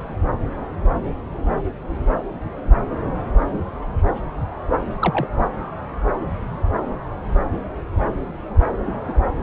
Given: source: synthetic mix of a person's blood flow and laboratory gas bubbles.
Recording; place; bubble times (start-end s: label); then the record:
Doppler ultrasound of blood flow; subclavian vein
5.00-5.28 s: bubbles
8.86-8.93 s: bubbles
9.04-9.13 s: bubbles
From the record:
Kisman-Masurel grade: 112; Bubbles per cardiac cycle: 1 to 2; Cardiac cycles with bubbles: 1 to 10%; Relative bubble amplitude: moderate (0.250 to 0.450); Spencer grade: 1 (occasional bubble signal discernible with the cardiac motion signal, with majority of cardiac periods free of bubbles); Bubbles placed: anywhere in the cardiac cycle